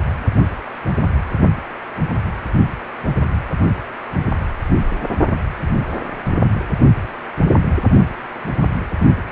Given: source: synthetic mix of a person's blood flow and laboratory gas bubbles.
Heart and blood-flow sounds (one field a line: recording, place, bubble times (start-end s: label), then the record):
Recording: Doppler ultrasound of blood flow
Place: precordium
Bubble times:
no bubbles
From the record:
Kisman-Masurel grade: 000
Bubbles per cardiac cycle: 0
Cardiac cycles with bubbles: 0%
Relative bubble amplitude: no bubbles discernible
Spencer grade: 0 (complete lack of bubble signals)